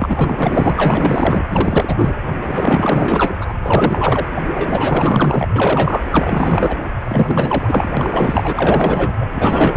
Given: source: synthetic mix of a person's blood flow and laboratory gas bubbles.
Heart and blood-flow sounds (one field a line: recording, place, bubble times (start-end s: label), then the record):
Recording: Doppler ultrasound of blood flow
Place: precordium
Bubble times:
0.00-0.74 s: bubbles
0.76-1.43 s: bubbles
1.49-2.15 s: bubbles
2.42-3.33 s: bubbles
3.40-3.53 s: bubbles
3.62-4.27 s: bubbles
4.54-5.47 s: bubbles
5.56-6.03 s: bubbles
6.12-6.77 s: bubbles
7.05-7.89 s: bubbles
7.96-9.12 s: bubbles
9.20-9.77 s: bubbles
From the record:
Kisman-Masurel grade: 444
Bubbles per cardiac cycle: continuous sound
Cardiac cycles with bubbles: 100%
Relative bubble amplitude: maximal (0.775 to 0.999)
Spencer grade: 4 (maximum detectable bubble signal sounding continuously throughout systole and diastole of every cardiac period, and overriding the amplitude of the normal cardiac signals)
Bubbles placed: anywhere in the cardiac cycle